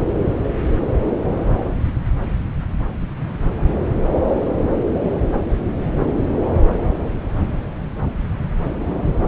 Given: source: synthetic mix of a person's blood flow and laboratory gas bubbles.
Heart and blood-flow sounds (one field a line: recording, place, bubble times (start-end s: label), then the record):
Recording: Doppler ultrasound of blood flow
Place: subclavian vein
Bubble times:
no bubbles
From the record:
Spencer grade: 0 (complete lack of bubble signals)